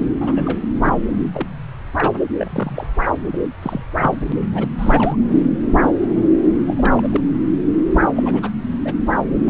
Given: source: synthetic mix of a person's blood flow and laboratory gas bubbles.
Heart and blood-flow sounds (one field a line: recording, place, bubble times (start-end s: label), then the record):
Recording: Doppler ultrasound of blood flow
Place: subclavian vein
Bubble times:
0.20-0.58 s: bubbles
0.82-0.96 s: bubbles
1.33-1.49 s: bubbles
1.97-2.12 s: bubbles
2.39-2.48 s: bubbles
2.52-2.87 s: bubbles
3.33-3.37 s: bubbles
3.62-3.84 s: bubbles
4.00-4.14 s: bubbles
4.19-4.32 s: bubbles
4.51-4.67 s: bubbles
4.78-5.16 s: bubbles
6.67-7.20 s: bubbles
8.15-8.50 s: bubbles
8.85-8.94 s: bubbles
9.45-9.50 s: bubbles
From the record:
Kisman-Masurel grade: 232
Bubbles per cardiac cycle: several, 3 to 8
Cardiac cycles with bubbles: 50 to 99%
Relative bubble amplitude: moderate (0.250 to 0.450)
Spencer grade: 3 (all of the cardiac periods contain showers or single bubble signals, but not dominating or overriding the cardiac motion signals)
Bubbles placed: anywhere in the cardiac cycle